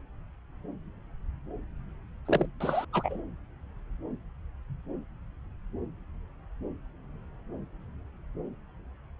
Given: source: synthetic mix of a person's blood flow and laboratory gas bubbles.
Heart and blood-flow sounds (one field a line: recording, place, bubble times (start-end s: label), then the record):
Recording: Doppler ultrasound of blood flow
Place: subclavian vein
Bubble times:
2.26-2.46 s: bubbles
2.60-2.85 s: bubbles
2.92-3.17 s: bubbles
From the record:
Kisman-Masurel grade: 211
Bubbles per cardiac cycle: several, 3 to 8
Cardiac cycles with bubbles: 1 to 10%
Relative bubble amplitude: barely perceptible (0.100 to 0.250)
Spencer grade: 1 (occasional bubble signal discernible with the cardiac motion signal, with majority of cardiac periods free of bubbles)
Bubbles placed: anywhere in the cardiac cycle